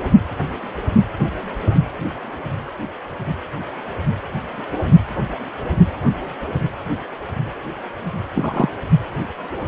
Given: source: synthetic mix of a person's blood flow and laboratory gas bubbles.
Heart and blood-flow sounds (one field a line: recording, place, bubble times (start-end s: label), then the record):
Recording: Doppler ultrasound of blood flow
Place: precordium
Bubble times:
8.35-8.69 s: bubbles
From the record:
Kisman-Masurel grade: 122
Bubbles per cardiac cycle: 1 to 2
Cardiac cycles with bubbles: 10 to 50%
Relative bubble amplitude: moderate (0.250 to 0.450)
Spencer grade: 2 (many but less than half of the cardiac periods contain bubble signals, singularly or in groups)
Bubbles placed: anywhere in the cardiac cycle